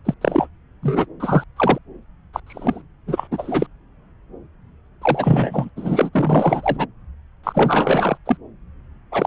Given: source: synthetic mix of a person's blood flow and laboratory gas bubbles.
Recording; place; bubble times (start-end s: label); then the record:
Doppler ultrasound of blood flow; subclavian vein
0.05-0.14 s: bubbles
0.21-0.46 s: bubbles
0.82-1.06 s: bubbles
1.20-1.44 s: bubbles
1.56-1.78 s: bubbles
2.33-2.40 s: bubbles
2.46-2.82 s: bubbles
3.06-3.27 s: bubbles
3.31-3.66 s: bubbles
5.02-5.70 s: bubbles
5.76-6.10 s: bubbles
6.13-6.86 s: bubbles
7.43-8.17 s: bubbles
8.25-8.37 s: bubbles
9.12-9.27 s: bubbles
From the record:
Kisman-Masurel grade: 333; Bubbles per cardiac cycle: rolling drumbeat, 9 or more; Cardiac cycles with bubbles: 50 to 99%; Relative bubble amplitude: loud (0.450 to 0.775); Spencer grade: 3 (all of the cardiac periods contain showers or single bubble signals, but not dominating or overriding the cardiac motion signals); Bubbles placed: anywhere in the cardiac cycle